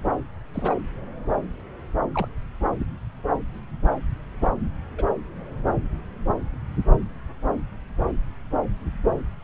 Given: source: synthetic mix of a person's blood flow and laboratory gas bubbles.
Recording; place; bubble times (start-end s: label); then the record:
Doppler ultrasound of blood flow; subclavian vein
0.54-0.74 s: bubbles
2.12-2.26 s: bubbles
2.79-2.85 s: bubbles
4.41-4.49 s: bubbles
4.98-5.04 s: bubbles
From the record:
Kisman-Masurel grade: 121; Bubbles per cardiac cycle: 1 to 2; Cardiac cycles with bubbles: 10 to 50%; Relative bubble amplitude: barely perceptible (0.100 to 0.250); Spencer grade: 2 (many but less than half of the cardiac periods contain bubble signals, singularly or in groups); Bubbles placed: anywhere in the cardiac cycle